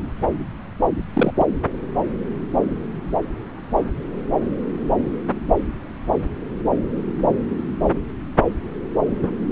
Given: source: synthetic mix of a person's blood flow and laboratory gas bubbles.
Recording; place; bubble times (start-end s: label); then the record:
Doppler ultrasound of blood flow; subclavian vein
1.14-1.32 s: bubbles
1.38-1.46 s: bubbles
From the record:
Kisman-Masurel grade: 212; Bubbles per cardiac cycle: several, 3 to 8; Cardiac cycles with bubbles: 1 to 10%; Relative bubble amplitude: moderate (0.250 to 0.450); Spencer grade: 1 (occasional bubble signal discernible with the cardiac motion signal, with majority of cardiac periods free of bubbles); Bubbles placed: anywhere in the cardiac cycle